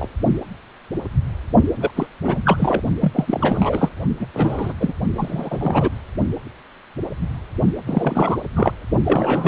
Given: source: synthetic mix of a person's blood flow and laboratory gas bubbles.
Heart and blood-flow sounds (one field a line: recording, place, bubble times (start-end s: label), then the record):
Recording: Doppler ultrasound of blood flow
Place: precordium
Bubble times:
0.00-0.08 s: bubbles
1.81-1.91 s: bubbles
1.95-2.06 s: bubbles
2.23-2.42 s: bubbles
2.45-2.81 s: bubbles
3.00-3.12 s: bubbles
3.14-3.90 s: bubbles
4.19-4.26 s: bubbles
4.33-4.73 s: bubbles
4.80-4.93 s: bubbles
5.14-5.90 s: bubbles
7.86-8.38 s: bubbles
8.55-8.71 s: bubbles
9.04-9.48 s: bubbles
From the record:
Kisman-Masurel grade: 332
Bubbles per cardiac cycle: rolling drumbeat, 9 or more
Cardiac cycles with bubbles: 50 to 99%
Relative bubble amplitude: moderate (0.250 to 0.450)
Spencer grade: 3 (all of the cardiac periods contain showers or single bubble signals, but not dominating or overriding the cardiac motion signals)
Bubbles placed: only in the low amplitude regions of the cardiac cycle